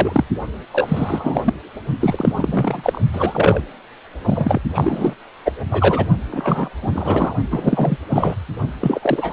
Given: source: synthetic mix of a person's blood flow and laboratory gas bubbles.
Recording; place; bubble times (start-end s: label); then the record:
Doppler ultrasound of blood flow; precordium
0.00-0.25 s: bubbles
0.72-1.54 s: bubbles
2.00-3.01 s: bubbles
3.13-3.62 s: bubbles
4.24-4.59 s: bubbles
4.73-5.15 s: bubbles
5.45-5.52 s: bubbles
5.70-6.07 s: bubbles
6.31-6.70 s: bubbles
6.82-7.33 s: bubbles
7.50-7.97 s: bubbles
8.09-8.35 s: bubbles
8.81-9.33 s: bubbles
From the record:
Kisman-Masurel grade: 343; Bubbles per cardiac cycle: rolling drumbeat, 9 or more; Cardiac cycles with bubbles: 100%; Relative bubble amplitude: loud (0.450 to 0.775); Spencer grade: 3 (all of the cardiac periods contain showers or single bubble signals, but not dominating or overriding the cardiac motion signals); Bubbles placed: only in the low amplitude regions of the cardiac cycle